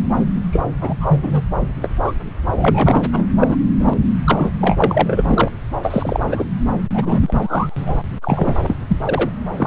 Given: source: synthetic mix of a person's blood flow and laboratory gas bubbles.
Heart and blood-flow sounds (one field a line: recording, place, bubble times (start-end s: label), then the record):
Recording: Doppler ultrasound of blood flow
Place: subclavian vein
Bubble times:
0.52-0.62 s: bubbles
0.81-1.44 s: bubbles
1.80-1.91 s: bubbles
2.02-2.12 s: bubbles
2.52-3.01 s: bubbles
3.12-3.26 s: bubbles
3.39-3.56 s: bubbles
3.79-3.94 s: bubbles
4.24-4.51 s: bubbles
4.60-5.48 s: bubbles
5.81-6.44 s: bubbles
6.93-7.33 s: bubbles
7.40-7.97 s: bubbles
8.21-8.59 s: bubbles
8.66-8.76 s: bubbles
8.88-8.96 s: bubbles
9.05-9.29 s: bubbles
9.53-9.67 s: bubbles
From the record:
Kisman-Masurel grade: 243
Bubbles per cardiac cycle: several, 3 to 8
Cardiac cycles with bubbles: 100%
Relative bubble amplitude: loud (0.450 to 0.775)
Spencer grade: 3 (all of the cardiac periods contain showers or single bubble signals, but not dominating or overriding the cardiac motion signals)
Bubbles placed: anywhere in the cardiac cycle